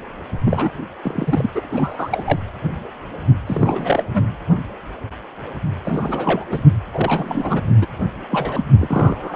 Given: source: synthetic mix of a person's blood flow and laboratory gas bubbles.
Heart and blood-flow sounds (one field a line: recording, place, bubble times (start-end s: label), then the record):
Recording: Doppler ultrasound of blood flow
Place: precordium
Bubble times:
0.45-0.71 s: bubbles
1.02-1.47 s: bubbles
1.54-2.39 s: bubbles
3.47-4.04 s: bubbles
4.14-4.23 s: bubbles
5.85-6.45 s: bubbles
6.49-6.62 s: bubbles
6.94-7.61 s: bubbles
7.81-7.87 s: bubbles
8.30-8.64 s: bubbles
8.79-9.36 s: bubbles
From the record:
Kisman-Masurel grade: 332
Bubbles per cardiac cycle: rolling drumbeat, 9 or more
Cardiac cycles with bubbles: 50 to 99%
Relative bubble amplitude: moderate (0.250 to 0.450)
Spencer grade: 3 (all of the cardiac periods contain showers or single bubble signals, but not dominating or overriding the cardiac motion signals)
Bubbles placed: anywhere in the cardiac cycle